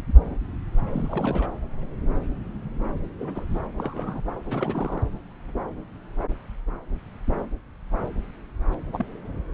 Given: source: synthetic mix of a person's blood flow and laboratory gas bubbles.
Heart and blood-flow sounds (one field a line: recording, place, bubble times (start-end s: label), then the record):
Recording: Doppler ultrasound of blood flow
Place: subclavian vein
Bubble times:
0.91-1.50 s: bubbles
3.19-3.45 s: bubbles
3.54-3.59 s: bubbles
3.78-4.23 s: bubbles
4.47-5.03 s: bubbles
8.93-9.05 s: bubbles
From the record:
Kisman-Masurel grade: 221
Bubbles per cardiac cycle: several, 3 to 8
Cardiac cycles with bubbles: 10 to 50%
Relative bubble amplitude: barely perceptible (0.100 to 0.250)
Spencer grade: 2 (many but less than half of the cardiac periods contain bubble signals, singularly or in groups)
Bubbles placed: anywhere in the cardiac cycle